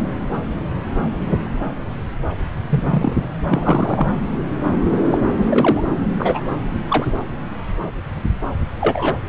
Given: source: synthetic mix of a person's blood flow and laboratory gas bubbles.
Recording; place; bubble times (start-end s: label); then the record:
Doppler ultrasound of blood flow; subclavian vein
2.69-3.13 s: bubbles
3.48-4.09 s: bubbles
5.11-5.18 s: bubbles
5.49-5.83 s: bubbles
6.18-6.41 s: bubbles
6.88-7.05 s: bubbles
8.80-9.16 s: bubbles
From the record:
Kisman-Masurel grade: 123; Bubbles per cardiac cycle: 1 to 2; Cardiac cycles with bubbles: 10 to 50%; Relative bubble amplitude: loud (0.450 to 0.775); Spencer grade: 2 (many but less than half of the cardiac periods contain bubble signals, singularly or in groups); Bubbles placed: anywhere in the cardiac cycle